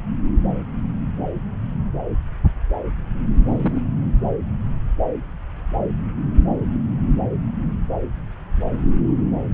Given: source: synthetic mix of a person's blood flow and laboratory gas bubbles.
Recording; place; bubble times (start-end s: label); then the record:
Doppler ultrasound of blood flow; subclavian vein
3.44-3.82 s: bubbles
From the record:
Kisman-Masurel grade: 111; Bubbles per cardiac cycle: 1 to 2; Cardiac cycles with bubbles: 1 to 10%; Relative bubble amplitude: barely perceptible (0.100 to 0.250); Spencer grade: 1 (occasional bubble signal discernible with the cardiac motion signal, with majority of cardiac periods free of bubbles); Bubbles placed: anywhere in the cardiac cycle